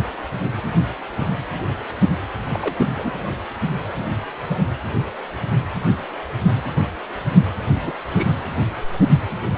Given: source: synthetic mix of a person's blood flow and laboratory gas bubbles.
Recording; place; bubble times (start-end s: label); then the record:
Doppler ultrasound of blood flow; precordium
2.54-3.11 s: bubbles
7.59-7.63 s: bubbles
7.71-7.95 s: bubbles
8.07-8.43 s: bubbles
From the record:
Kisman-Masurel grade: 221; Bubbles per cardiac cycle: several, 3 to 8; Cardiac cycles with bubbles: 10 to 50%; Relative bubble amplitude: barely perceptible (0.100 to 0.250); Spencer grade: 2 (many but less than half of the cardiac periods contain bubble signals, singularly or in groups); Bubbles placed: anywhere in the cardiac cycle